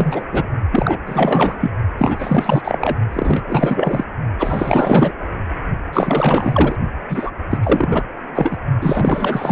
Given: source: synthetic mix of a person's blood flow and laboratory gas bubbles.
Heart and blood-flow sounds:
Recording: Doppler ultrasound of blood flow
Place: precordium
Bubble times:
0.00-0.23 s: bubbles
0.31-0.47 s: bubbles
0.71-1.00 s: bubbles
1.06-1.56 s: bubbles
1.60-1.71 s: bubbles
1.97-2.96 s: bubbles
3.13-3.43 s: bubbles
3.47-4.04 s: bubbles
4.39-5.12 s: bubbles
5.92-6.75 s: bubbles
7.09-7.31 s: bubbles
7.50-7.59 s: bubbles
7.63-8.04 s: bubbles
8.35-8.57 s: bubbles
8.81-9.51 s: bubbles
From the record:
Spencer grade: 4 (maximum detectable bubble signal sounding continuously throughout systole and diastole of every cardiac period, and overriding the amplitude of the normal cardiac signals)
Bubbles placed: only in the low amplitude regions of the cardiac cycle

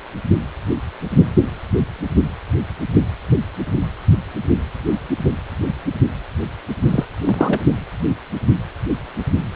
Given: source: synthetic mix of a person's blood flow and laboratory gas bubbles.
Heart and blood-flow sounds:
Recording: Doppler ultrasound of blood flow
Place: precordium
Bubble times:
6.88-7.06 s: bubbles
7.24-7.61 s: bubbles
From the record:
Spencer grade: 2 (many but less than half of the cardiac periods contain bubble signals, singularly or in groups)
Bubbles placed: only in the low amplitude regions of the cardiac cycle

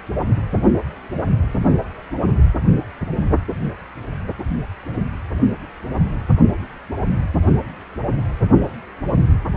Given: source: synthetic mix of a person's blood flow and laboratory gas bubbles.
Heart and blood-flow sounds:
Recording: Doppler ultrasound of blood flow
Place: precordium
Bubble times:
no bubbles
From the record:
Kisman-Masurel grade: 000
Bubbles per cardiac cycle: 0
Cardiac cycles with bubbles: 0%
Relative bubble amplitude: no bubbles discernible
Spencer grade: 0 (complete lack of bubble signals)

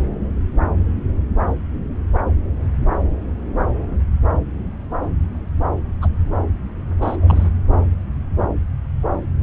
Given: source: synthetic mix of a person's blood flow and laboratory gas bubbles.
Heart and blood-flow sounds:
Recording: Doppler ultrasound of blood flow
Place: subclavian vein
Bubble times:
6.02-6.08 s: bubbles
7.01-7.49 s: bubbles
From the record:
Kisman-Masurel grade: 211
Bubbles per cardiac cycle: several, 3 to 8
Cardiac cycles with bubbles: 1 to 10%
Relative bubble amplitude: barely perceptible (0.100 to 0.250)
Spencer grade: 1 (occasional bubble signal discernible with the cardiac motion signal, with majority of cardiac periods free of bubbles)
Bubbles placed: anywhere in the cardiac cycle

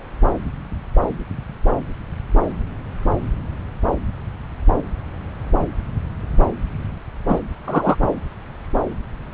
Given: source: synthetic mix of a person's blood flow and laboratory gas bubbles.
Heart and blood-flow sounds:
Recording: Doppler ultrasound of blood flow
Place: subclavian vein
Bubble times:
7.28-7.40 s: bubbles
7.66-7.96 s: bubbles
From the record:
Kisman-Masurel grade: 113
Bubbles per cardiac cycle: 1 to 2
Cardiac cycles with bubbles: 1 to 10%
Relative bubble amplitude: loud (0.450 to 0.775)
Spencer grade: 1 (occasional bubble signal discernible with the cardiac motion signal, with majority of cardiac periods free of bubbles)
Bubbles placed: anywhere in the cardiac cycle

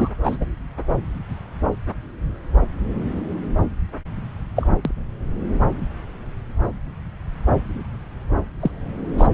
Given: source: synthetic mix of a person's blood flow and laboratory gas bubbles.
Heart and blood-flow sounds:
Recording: Doppler ultrasound of blood flow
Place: subclavian vein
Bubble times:
0.00-0.09 s: bubbles
0.23-0.38 s: bubbles
0.40-0.46 s: bubbles
4.56-4.67 s: bubbles
4.85-4.91 s: bubbles
8.60-8.71 s: bubbles
9.17-9.27 s: bubbles
From the record:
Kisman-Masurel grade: 123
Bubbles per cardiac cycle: 1 to 2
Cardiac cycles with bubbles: 10 to 50%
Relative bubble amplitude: loud (0.450 to 0.775)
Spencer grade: 2 (many but less than half of the cardiac periods contain bubble signals, singularly or in groups)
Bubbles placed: anywhere in the cardiac cycle

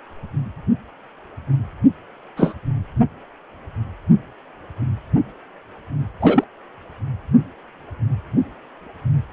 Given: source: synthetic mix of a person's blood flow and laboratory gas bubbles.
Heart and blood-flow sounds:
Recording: Doppler ultrasound of blood flow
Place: precordium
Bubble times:
2.37-2.54 s: bubbles
6.21-6.44 s: bubbles
From the record:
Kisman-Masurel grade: 123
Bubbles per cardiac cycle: 1 to 2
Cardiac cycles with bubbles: 10 to 50%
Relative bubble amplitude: loud (0.450 to 0.775)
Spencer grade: 2 (many but less than half of the cardiac periods contain bubble signals, singularly or in groups)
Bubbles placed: anywhere in the cardiac cycle

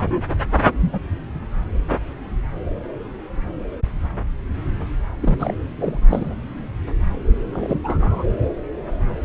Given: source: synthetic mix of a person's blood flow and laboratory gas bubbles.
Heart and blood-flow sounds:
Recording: Doppler ultrasound of blood flow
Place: subclavian vein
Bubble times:
0.00-0.22 s: bubbles
0.56-0.72 s: bubbles
0.80-1.00 s: bubbles
5.21-5.55 s: bubbles
5.78-6.00 s: bubbles
6.08-6.34 s: bubbles
7.53-7.81 s: bubbles
7.84-8.24 s: bubbles
From the record:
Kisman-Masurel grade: 222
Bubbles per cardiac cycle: several, 3 to 8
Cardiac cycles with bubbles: 10 to 50%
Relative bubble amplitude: moderate (0.250 to 0.450)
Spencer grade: 2 (many but less than half of the cardiac periods contain bubble signals, singularly or in groups)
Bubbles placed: anywhere in the cardiac cycle

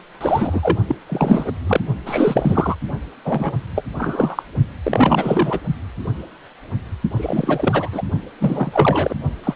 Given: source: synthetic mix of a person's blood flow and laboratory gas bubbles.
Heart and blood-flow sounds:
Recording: Doppler ultrasound of blood flow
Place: precordium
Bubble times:
0.14-0.78 s: bubbles
0.88-0.95 s: bubbles
1.06-1.51 s: bubbles
1.66-1.80 s: bubbles
2.05-2.75 s: bubbles
3.25-3.52 s: bubbles
3.75-3.83 s: bubbles
3.98-4.43 s: bubbles
4.84-5.61 s: bubbles
7.16-7.89 s: bubbles
7.92-8.02 s: bubbles
8.40-9.15 s: bubbles
9.44-9.54 s: bubbles
From the record:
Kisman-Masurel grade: 333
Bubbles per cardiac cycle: rolling drumbeat, 9 or more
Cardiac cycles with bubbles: 50 to 99%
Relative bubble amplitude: loud (0.450 to 0.775)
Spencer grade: 3 (all of the cardiac periods contain showers or single bubble signals, but not dominating or overriding the cardiac motion signals)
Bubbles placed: only in the low amplitude regions of the cardiac cycle

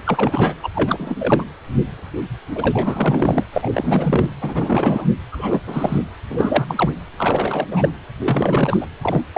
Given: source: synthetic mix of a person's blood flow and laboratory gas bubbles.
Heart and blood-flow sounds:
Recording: Doppler ultrasound of blood flow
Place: precordium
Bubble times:
0.05-0.54 s: bubbles
0.62-0.71 s: bubbles
0.74-1.16 s: bubbles
1.19-1.45 s: bubbles
2.55-3.44 s: bubbles
3.52-3.70 s: bubbles
3.73-4.30 s: bubbles
4.41-5.05 s: bubbles
5.32-5.61 s: bubbles
5.67-5.99 s: bubbles
6.29-6.90 s: bubbles
7.18-7.67 s: bubbles
7.70-7.91 s: bubbles
8.19-8.77 s: bubbles
8.81-8.86 s: bubbles
9.02-9.22 s: bubbles
9.33-9.38 s: bubbles
From the record:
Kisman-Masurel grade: 333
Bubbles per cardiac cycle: rolling drumbeat, 9 or more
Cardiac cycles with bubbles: 50 to 99%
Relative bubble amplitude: loud (0.450 to 0.775)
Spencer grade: 3 (all of the cardiac periods contain showers or single bubble signals, but not dominating or overriding the cardiac motion signals)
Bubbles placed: anywhere in the cardiac cycle

